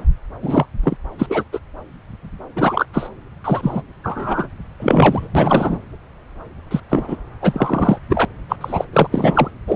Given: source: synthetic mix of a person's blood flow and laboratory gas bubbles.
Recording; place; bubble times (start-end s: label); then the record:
Doppler ultrasound of blood flow; subclavian vein
0.42-0.66 s: bubbles
0.83-0.97 s: bubbles
1.19-1.27 s: bubbles
1.30-1.44 s: bubbles
1.53-1.59 s: bubbles
2.55-2.86 s: bubbles
2.92-3.10 s: bubbles
3.44-3.82 s: bubbles
4.04-4.47 s: bubbles
4.79-5.28 s: bubbles
5.35-5.78 s: bubbles
6.71-6.80 s: bubbles
6.89-7.05 s: bubbles
7.08-7.16 s: bubbles
7.41-7.98 s: bubbles
8.10-8.25 s: bubbles
8.49-8.56 s: bubbles
8.61-8.85 s: bubbles
8.93-9.07 s: bubbles
9.12-9.51 s: bubbles
9.67-9.76 s: bubbles
From the record:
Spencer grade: 3 (all of the cardiac periods contain showers or single bubble signals, but not dominating or overriding the cardiac motion signals); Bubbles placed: anywhere in the cardiac cycle